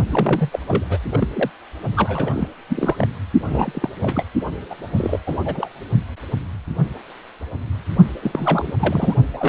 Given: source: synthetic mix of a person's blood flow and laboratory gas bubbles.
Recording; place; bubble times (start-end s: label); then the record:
Doppler ultrasound of blood flow; precordium
0.09-0.59 s: bubbles
0.68-0.84 s: bubbles
0.90-0.98 s: bubbles
1.10-1.28 s: bubbles
1.33-1.50 s: bubbles
1.96-2.48 s: bubbles
2.69-3.08 s: bubbles
3.44-3.90 s: bubbles
3.95-4.25 s: bubbles
4.70-4.75 s: bubbles
4.96-5.20 s: bubbles
5.27-5.37 s: bubbles
5.45-5.68 s: bubbles
8.21-8.73 s: bubbles
8.79-9.14 s: bubbles
9.33-9.49 s: bubbles
From the record:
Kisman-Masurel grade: 332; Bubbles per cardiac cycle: rolling drumbeat, 9 or more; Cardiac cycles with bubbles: 50 to 99%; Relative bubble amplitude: moderate (0.250 to 0.450); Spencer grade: 3 (all of the cardiac periods contain showers or single bubble signals, but not dominating or overriding the cardiac motion signals); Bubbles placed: only in the low amplitude regions of the cardiac cycle